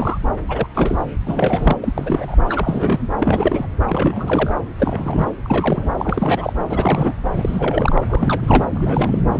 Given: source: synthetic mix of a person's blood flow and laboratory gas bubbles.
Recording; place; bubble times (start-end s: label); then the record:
Doppler ultrasound of blood flow; subclavian vein
0.00-0.18 s: bubbles
0.48-0.67 s: bubbles
0.74-1.02 s: bubbles
1.26-1.76 s: bubbles
1.82-2.37 s: bubbles
2.46-3.08 s: bubbles
3.20-3.67 s: bubbles
3.88-4.55 s: bubbles
4.78-5.31 s: bubbles
5.44-5.89 s: bubbles
5.97-6.53 s: bubbles
6.69-7.13 s: bubbles
7.35-8.02 s: bubbles
8.08-8.65 s: bubbles
8.71-9.19 s: bubbles
9.32-9.40 s: bubbles
From the record:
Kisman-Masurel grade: 332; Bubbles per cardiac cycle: rolling drumbeat, 9 or more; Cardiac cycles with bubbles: 50 to 99%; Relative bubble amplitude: moderate (0.250 to 0.450); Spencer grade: 3 (all of the cardiac periods contain showers or single bubble signals, but not dominating or overriding the cardiac motion signals); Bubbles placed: anywhere in the cardiac cycle